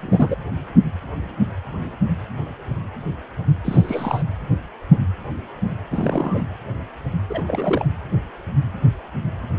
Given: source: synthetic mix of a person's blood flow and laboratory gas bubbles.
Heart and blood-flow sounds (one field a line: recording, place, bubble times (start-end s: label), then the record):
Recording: Doppler ultrasound of blood flow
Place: precordium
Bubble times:
0.00-0.35 s: bubbles
3.65-4.23 s: bubbles
5.91-6.44 s: bubbles
7.29-7.42 s: bubbles
7.46-7.87 s: bubbles
From the record:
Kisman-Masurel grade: 222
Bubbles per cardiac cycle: several, 3 to 8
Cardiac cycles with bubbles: 10 to 50%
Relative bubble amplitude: moderate (0.250 to 0.450)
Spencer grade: 2 (many but less than half of the cardiac periods contain bubble signals, singularly or in groups)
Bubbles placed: anywhere in the cardiac cycle